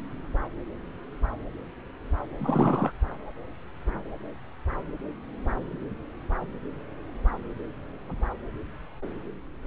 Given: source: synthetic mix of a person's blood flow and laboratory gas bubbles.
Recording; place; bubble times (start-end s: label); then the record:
Doppler ultrasound of blood flow; subclavian vein
2.38-2.92 s: bubbles
From the record:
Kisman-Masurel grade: 211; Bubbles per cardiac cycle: several, 3 to 8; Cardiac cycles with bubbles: 1 to 10%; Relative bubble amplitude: barely perceptible (0.100 to 0.250); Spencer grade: 1 (occasional bubble signal discernible with the cardiac motion signal, with majority of cardiac periods free of bubbles); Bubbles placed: anywhere in the cardiac cycle